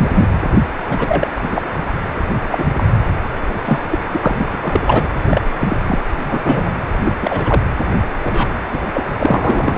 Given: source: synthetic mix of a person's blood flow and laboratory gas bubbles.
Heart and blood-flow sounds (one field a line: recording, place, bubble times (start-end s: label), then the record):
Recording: Doppler ultrasound of blood flow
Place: precordium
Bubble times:
0.00-0.28 s: bubbles
0.90-1.32 s: bubbles
1.36-1.62 s: bubbles
1.74-1.79 s: bubbles
2.51-2.84 s: bubbles
3.65-3.81 s: bubbles
3.91-3.99 s: bubbles
4.11-5.06 s: bubbles
5.25-5.41 s: bubbles
5.59-5.77 s: bubbles
5.87-6.01 s: bubbles
6.24-6.75 s: bubbles
7.03-7.13 s: bubbles
7.22-7.61 s: bubbles
8.24-8.61 s: bubbles
8.72-8.79 s: bubbles
8.94-9.03 s: bubbles
9.08-9.11 s: bubbles
9.20-9.78 s: bubbles
From the record:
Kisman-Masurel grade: 243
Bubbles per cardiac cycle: several, 3 to 8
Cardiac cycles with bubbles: 100%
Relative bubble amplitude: loud (0.450 to 0.775)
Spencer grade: 3 (all of the cardiac periods contain showers or single bubble signals, but not dominating or overriding the cardiac motion signals)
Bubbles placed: anywhere in the cardiac cycle